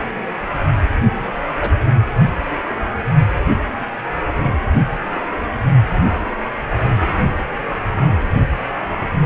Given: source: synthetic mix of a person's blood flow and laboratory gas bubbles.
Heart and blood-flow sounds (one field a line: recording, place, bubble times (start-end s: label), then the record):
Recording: Doppler ultrasound of blood flow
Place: precordium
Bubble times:
1.61-1.71 s: bubbles
From the record:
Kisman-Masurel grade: 122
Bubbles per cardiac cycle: 1 to 2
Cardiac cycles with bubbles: 10 to 50%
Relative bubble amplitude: moderate (0.250 to 0.450)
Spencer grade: 2 (many but less than half of the cardiac periods contain bubble signals, singularly or in groups)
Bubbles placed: only in the low amplitude regions of the cardiac cycle